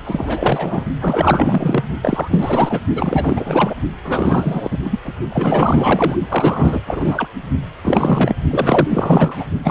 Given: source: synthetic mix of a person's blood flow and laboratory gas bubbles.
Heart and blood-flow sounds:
Doppler ultrasound of blood flow; precordium
0.04-0.85 s: bubbles
1.00-1.84 s: bubbles
2.02-2.80 s: bubbles
2.94-3.75 s: bubbles
4.04-4.79 s: bubbles
4.85-5.00 s: bubbles
5.04-5.14 s: bubbles
5.30-6.16 s: bubbles
6.29-6.83 s: bubbles
6.87-7.28 s: bubbles
7.83-8.36 s: bubbles
8.49-9.45 s: bubbles
9.63-9.71 s: bubbles
From the record:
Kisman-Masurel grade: 444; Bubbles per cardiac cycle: continuous sound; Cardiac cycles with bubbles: 100%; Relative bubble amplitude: maximal (0.775 to 0.999); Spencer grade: 4 (maximum detectable bubble signal sounding continuously throughout systole and diastole of every cardiac period, and overriding the amplitude of the normal cardiac signals); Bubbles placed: only in the low amplitude regions of the cardiac cycle

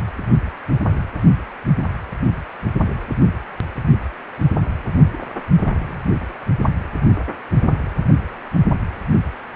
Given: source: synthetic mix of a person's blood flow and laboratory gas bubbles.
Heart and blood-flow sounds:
Doppler ultrasound of blood flow; precordium
5.14-5.17 s: bubbles
5.21-5.26 s: bubbles
5.56-5.99 s: bubbles
From the record:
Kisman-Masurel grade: 211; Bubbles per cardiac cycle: several, 3 to 8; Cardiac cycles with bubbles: 1 to 10%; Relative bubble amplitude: barely perceptible (0.100 to 0.250); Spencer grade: 1 (occasional bubble signal discernible with the cardiac motion signal, with majority of cardiac periods free of bubbles); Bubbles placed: only in the low amplitude regions of the cardiac cycle

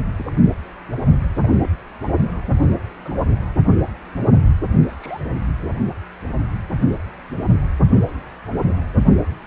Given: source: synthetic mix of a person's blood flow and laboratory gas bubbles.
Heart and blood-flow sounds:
Doppler ultrasound of blood flow; precordium
0.16-0.32 s: bubbles
1.41-1.56 s: bubbles
1.62-1.70 s: bubbles
3.04-3.11 s: bubbles
4.88-5.21 s: bubbles
From the record:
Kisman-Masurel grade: 121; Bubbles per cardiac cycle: 1 to 2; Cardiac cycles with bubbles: 10 to 50%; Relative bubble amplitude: barely perceptible (0.100 to 0.250); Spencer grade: 2 (many but less than half of the cardiac periods contain bubble signals, singularly or in groups); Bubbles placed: only in the low amplitude regions of the cardiac cycle

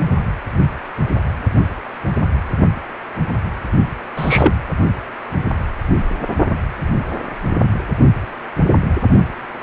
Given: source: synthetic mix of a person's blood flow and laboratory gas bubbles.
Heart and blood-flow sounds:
Doppler ultrasound of blood flow; precordium
4.17-4.53 s: bubbles
From the record:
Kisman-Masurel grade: 123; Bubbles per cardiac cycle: 1 to 2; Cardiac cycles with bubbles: 10 to 50%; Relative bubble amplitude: loud (0.450 to 0.775); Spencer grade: 2 (many but less than half of the cardiac periods contain bubble signals, singularly or in groups); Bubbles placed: only in the low amplitude regions of the cardiac cycle

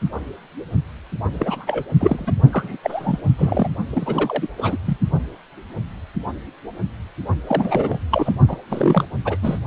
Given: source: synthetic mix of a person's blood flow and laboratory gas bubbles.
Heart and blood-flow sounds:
Doppler ultrasound of blood flow; precordium
1.33-1.83 s: bubbles
1.99-2.32 s: bubbles
2.52-2.77 s: bubbles
2.83-3.35 s: bubbles
3.38-3.69 s: bubbles
3.90-4.48 s: bubbles
4.57-4.77 s: bubbles
4.85-4.97 s: bubbles
7.46-7.99 s: bubbles
8.11-8.33 s: bubbles
8.48-8.57 s: bubbles
8.70-9.07 s: bubbles
9.25-9.37 s: bubbles
9.42-9.59 s: bubbles
From the record:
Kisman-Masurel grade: 332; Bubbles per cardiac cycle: rolling drumbeat, 9 or more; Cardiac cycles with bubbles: 50 to 99%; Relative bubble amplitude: moderate (0.250 to 0.450); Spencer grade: 3 (all of the cardiac periods contain showers or single bubble signals, but not dominating or overriding the cardiac motion signals); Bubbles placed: only in the low amplitude regions of the cardiac cycle

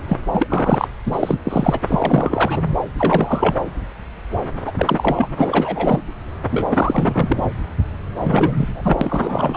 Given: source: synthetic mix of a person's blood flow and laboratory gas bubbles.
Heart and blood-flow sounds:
Doppler ultrasound of blood flow; subclavian vein
0.09-0.17 s: bubbles
0.33-0.88 s: bubbles
1.05-1.40 s: bubbles
1.44-1.80 s: bubbles
1.87-2.62 s: bubbles
2.98-3.56 s: bubbles
4.67-4.72 s: bubbles
4.77-5.28 s: bubbles
5.39-6.00 s: bubbles
6.51-7.43 s: bubbles
8.16-9.57 s: bubbles
From the record:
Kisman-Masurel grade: 333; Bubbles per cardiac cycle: rolling drumbeat, 9 or more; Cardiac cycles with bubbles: 50 to 99%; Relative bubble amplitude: loud (0.450 to 0.775); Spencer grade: 3 (all of the cardiac periods contain showers or single bubble signals, but not dominating or overriding the cardiac motion signals); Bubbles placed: anywhere in the cardiac cycle

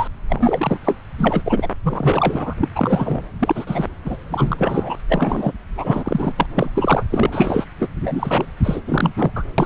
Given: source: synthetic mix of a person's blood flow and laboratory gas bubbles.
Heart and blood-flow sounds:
Doppler ultrasound of blood flow; subclavian vein
0.00-0.07 s: bubbles
0.29-0.78 s: bubbles
0.84-0.96 s: bubbles
1.18-1.69 s: bubbles
1.83-2.54 s: bubbles
2.60-2.68 s: bubbles
2.75-3.22 s: bubbles
3.39-3.86 s: bubbles
4.04-4.17 s: bubbles
4.30-4.96 s: bubbles
5.08-5.53 s: bubbles
5.78-6.33 s: bubbles
6.37-6.46 s: bubbles
6.54-6.71 s: bubbles
6.75-7.04 s: bubbles
7.10-7.65 s: bubbles
7.79-7.88 s: bubbles
8.00-8.46 s: bubbles
8.63-8.81 s: bubbles
8.88-9.13 s: bubbles
9.17-9.31 s: bubbles
9.35-9.44 s: bubbles
9.58-9.66 s: bubbles
From the record:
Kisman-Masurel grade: 343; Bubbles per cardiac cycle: rolling drumbeat, 9 or more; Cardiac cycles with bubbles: 100%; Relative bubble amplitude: loud (0.450 to 0.775); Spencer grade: 3 (all of the cardiac periods contain showers or single bubble signals, but not dominating or overriding the cardiac motion signals); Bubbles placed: anywhere in the cardiac cycle

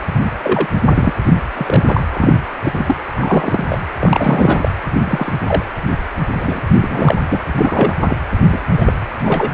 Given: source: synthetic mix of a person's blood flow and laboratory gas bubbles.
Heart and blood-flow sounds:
Doppler ultrasound of blood flow; precordium
0.43-0.67 s: bubbles
0.82-1.13 s: bubbles
1.23-1.35 s: bubbles
1.56-2.01 s: bubbles
2.13-2.40 s: bubbles
2.63-2.96 s: bubbles
3.15-3.65 s: bubbles
3.69-3.79 s: bubbles
3.99-4.71 s: bubbles
5.04-5.33 s: bubbles
5.47-5.62 s: bubbles
6.39-6.61 s: bubbles
6.79-7.17 s: bubbles
7.29-7.46 s: bubbles
7.55-7.95 s: bubbles
8.01-8.17 s: bubbles
8.49-8.59 s: bubbles
8.68-8.93 s: bubbles
9.22-9.50 s: bubbles
From the record:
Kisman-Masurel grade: 243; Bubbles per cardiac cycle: several, 3 to 8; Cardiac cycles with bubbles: 100%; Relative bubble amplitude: loud (0.450 to 0.775); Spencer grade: 3 (all of the cardiac periods contain showers or single bubble signals, but not dominating or overriding the cardiac motion signals); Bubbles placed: anywhere in the cardiac cycle

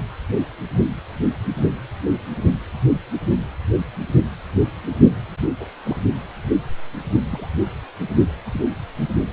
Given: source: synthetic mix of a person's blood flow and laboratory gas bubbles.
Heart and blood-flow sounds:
Doppler ultrasound of blood flow; precordium
5.60-5.64 s: bubbles
5.83-5.96 s: bubbles
7.29-7.48 s: bubbles
8.54-8.65 s: bubbles
8.96-9.07 s: bubbles
From the record:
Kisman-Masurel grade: 121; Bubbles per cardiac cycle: 1 to 2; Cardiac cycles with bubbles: 10 to 50%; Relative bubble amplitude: barely perceptible (0.100 to 0.250); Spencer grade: 2 (many but less than half of the cardiac periods contain bubble signals, singularly or in groups); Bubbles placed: only in the low amplitude regions of the cardiac cycle

